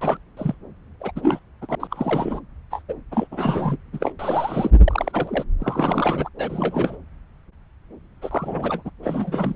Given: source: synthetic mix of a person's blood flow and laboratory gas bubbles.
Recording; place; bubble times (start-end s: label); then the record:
Doppler ultrasound of blood flow; subclavian vein
0.00-0.18 s: bubbles
0.37-0.55 s: bubbles
1.00-1.11 s: bubbles
1.15-1.39 s: bubbles
1.61-1.75 s: bubbles
1.79-1.88 s: bubbles
1.90-2.40 s: bubbles
2.71-2.82 s: bubbles
2.88-2.94 s: bubbles
3.11-3.27 s: bubbles
3.31-3.77 s: bubbles
3.93-4.12 s: bubbles
4.19-4.71 s: bubbles
4.88-5.44 s: bubbles
5.60-6.29 s: bubbles
6.38-6.97 s: bubbles
8.21-8.90 s: bubbles
9.02-9.54 s: bubbles
From the record:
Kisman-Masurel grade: 332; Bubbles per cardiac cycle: rolling drumbeat, 9 or more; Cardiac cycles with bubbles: 50 to 99%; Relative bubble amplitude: moderate (0.250 to 0.450); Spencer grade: 3 (all of the cardiac periods contain showers or single bubble signals, but not dominating or overriding the cardiac motion signals); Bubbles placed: anywhere in the cardiac cycle